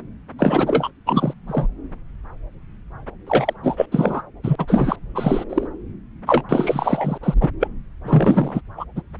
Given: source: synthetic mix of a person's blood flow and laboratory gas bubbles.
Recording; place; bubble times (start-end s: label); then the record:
Doppler ultrasound of blood flow; subclavian vein
0.38-0.92 s: bubbles
1.06-1.33 s: bubbles
1.47-1.67 s: bubbles
3.27-3.54 s: bubbles
3.63-3.86 s: bubbles
3.91-4.22 s: bubbles
4.43-4.55 s: bubbles
4.58-4.96 s: bubbles
5.14-5.44 s: bubbles
5.49-5.67 s: bubbles
6.26-6.43 s: bubbles
6.49-7.18 s: bubbles
7.23-7.34 s: bubbles
7.40-7.49 s: bubbles
7.59-7.68 s: bubbles
8.04-8.61 s: bubbles
8.77-8.85 s: bubbles
8.96-9.02 s: bubbles
From the record:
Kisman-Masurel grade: 333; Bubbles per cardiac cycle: rolling drumbeat, 9 or more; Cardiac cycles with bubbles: 50 to 99%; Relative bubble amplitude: loud (0.450 to 0.775); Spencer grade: 3 (all of the cardiac periods contain showers or single bubble signals, but not dominating or overriding the cardiac motion signals); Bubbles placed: anywhere in the cardiac cycle